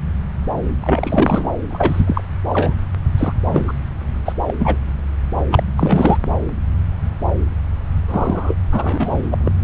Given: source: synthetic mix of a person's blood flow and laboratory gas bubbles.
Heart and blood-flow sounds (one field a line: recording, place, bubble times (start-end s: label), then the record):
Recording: Doppler ultrasound of blood flow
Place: subclavian vein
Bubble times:
0.82-1.51 s: bubbles
1.70-2.22 s: bubbles
2.49-2.73 s: bubbles
3.18-3.34 s: bubbles
3.45-3.73 s: bubbles
4.25-4.32 s: bubbles
4.47-4.54 s: bubbles
4.59-4.76 s: bubbles
5.51-5.63 s: bubbles
5.77-6.17 s: bubbles
8.08-8.56 s: bubbles
8.72-9.37 s: bubbles
9.45-9.52 s: bubbles
From the record:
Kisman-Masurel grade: 332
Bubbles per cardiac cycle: rolling drumbeat, 9 or more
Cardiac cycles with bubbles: 50 to 99%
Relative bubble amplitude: moderate (0.250 to 0.450)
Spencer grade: 3 (all of the cardiac periods contain showers or single bubble signals, but not dominating or overriding the cardiac motion signals)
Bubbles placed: anywhere in the cardiac cycle